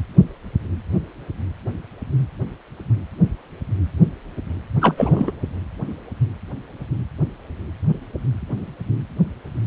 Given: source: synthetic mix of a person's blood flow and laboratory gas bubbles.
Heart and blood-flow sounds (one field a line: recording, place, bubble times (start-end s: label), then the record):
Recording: Doppler ultrasound of blood flow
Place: precordium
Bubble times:
4.81-5.32 s: bubbles
From the record:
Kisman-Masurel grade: 212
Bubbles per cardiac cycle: several, 3 to 8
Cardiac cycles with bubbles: 1 to 10%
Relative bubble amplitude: moderate (0.250 to 0.450)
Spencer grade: 1 (occasional bubble signal discernible with the cardiac motion signal, with majority of cardiac periods free of bubbles)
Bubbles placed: anywhere in the cardiac cycle